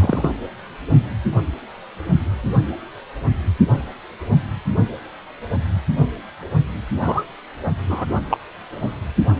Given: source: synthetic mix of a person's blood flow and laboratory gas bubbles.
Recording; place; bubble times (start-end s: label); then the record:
Doppler ultrasound of blood flow; precordium
0.01-0.29 s: bubbles
7.00-7.24 s: bubbles
7.88-8.06 s: bubbles
8.30-8.38 s: bubbles
From the record:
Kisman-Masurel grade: 122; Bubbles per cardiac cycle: 1 to 2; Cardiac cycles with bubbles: 10 to 50%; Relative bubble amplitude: moderate (0.250 to 0.450); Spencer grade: 2 (many but less than half of the cardiac periods contain bubble signals, singularly or in groups); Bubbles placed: only in the low amplitude regions of the cardiac cycle